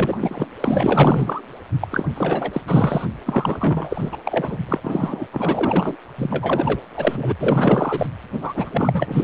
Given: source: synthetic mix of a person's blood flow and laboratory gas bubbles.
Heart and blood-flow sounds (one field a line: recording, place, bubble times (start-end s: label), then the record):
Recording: Doppler ultrasound of blood flow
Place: precordium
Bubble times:
0.00-0.46 s: bubbles
0.60-1.42 s: bubbles
1.80-1.88 s: bubbles
1.91-2.05 s: bubbles
2.14-2.61 s: bubbles
2.67-3.05 s: bubbles
3.25-4.17 s: bubbles
4.25-4.58 s: bubbles
4.68-5.27 s: bubbles
5.32-5.96 s: bubbles
6.17-6.81 s: bubbles
6.96-7.33 s: bubbles
7.39-8.06 s: bubbles
8.41-9.24 s: bubbles
From the record:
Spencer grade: 4 (maximum detectable bubble signal sounding continuously throughout systole and diastole of every cardiac period, and overriding the amplitude of the normal cardiac signals)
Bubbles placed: anywhere in the cardiac cycle